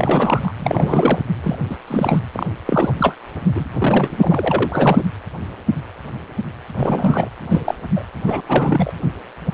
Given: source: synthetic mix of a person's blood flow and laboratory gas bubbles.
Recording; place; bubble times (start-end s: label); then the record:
Doppler ultrasound of blood flow; precordium
0.00-0.52 s: bubbles
0.59-1.19 s: bubbles
1.43-1.58 s: bubbles
1.69-1.77 s: bubbles
1.87-2.19 s: bubbles
2.32-2.46 s: bubbles
2.65-2.92 s: bubbles
2.98-3.15 s: bubbles
3.47-3.65 s: bubbles
3.78-5.03 s: bubbles
6.76-7.28 s: bubbles
7.49-7.74 s: bubbles
7.96-8.04 s: bubbles
8.26-8.41 s: bubbles
8.48-8.92 s: bubbles
From the record:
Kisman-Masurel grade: 333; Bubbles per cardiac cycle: rolling drumbeat, 9 or more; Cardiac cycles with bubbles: 50 to 99%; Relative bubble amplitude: loud (0.450 to 0.775); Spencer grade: 3 (all of the cardiac periods contain showers or single bubble signals, but not dominating or overriding the cardiac motion signals); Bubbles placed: anywhere in the cardiac cycle